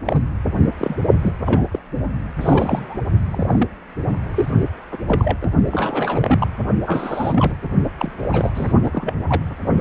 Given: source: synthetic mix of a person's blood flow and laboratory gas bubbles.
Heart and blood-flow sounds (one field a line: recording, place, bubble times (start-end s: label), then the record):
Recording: Doppler ultrasound of blood flow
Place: precordium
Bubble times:
0.05-0.23 s: bubbles
0.79-0.99 s: bubbles
1.22-1.34 s: bubbles
1.41-1.66 s: bubbles
1.71-1.79 s: bubbles
2.40-2.96 s: bubbles
3.30-3.67 s: bubbles
4.36-4.50 s: bubbles
4.92-4.97 s: bubbles
5.08-5.37 s: bubbles
5.42-5.47 s: bubbles
5.67-6.48 s: bubbles
6.86-7.53 s: bubbles
7.98-8.12 s: bubbles
8.20-8.51 s: bubbles
8.54-8.72 s: bubbles
8.83-9.13 s: bubbles
9.29-9.42 s: bubbles
From the record:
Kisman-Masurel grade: 232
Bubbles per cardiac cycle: several, 3 to 8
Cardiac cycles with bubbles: 50 to 99%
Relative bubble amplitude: moderate (0.250 to 0.450)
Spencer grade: 3 (all of the cardiac periods contain showers or single bubble signals, but not dominating or overriding the cardiac motion signals)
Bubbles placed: only in the low amplitude regions of the cardiac cycle